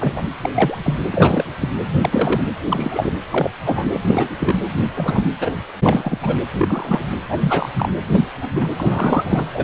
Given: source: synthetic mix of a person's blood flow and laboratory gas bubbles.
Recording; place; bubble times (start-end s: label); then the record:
Doppler ultrasound of blood flow; precordium
0.00-0.12 s: bubbles
0.15-0.22 s: bubbles
0.43-0.50 s: bubbles
0.54-0.78 s: bubbles
0.84-0.96 s: bubbles
1.11-1.44 s: bubbles
1.59-1.69 s: bubbles
2.01-2.42 s: bubbles
2.65-3.13 s: bubbles
3.31-3.50 s: bubbles
3.65-3.86 s: bubbles
3.93-4.57 s: bubbles
4.95-5.26 s: bubbles
5.40-5.54 s: bubbles
5.83-6.18 s: bubbles
6.21-6.37 s: bubbles
6.51-7.00 s: bubbles
7.29-7.69 s: bubbles
7.77-7.89 s: bubbles
8.12-8.25 s: bubbles
8.29-8.71 s: bubbles
8.78-9.46 s: bubbles
9.53-9.64 s: bubbles
From the record:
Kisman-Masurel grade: 243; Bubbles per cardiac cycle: several, 3 to 8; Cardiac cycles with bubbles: 100%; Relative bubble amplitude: loud (0.450 to 0.775); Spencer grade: 3 (all of the cardiac periods contain showers or single bubble signals, but not dominating or overriding the cardiac motion signals); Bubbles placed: anywhere in the cardiac cycle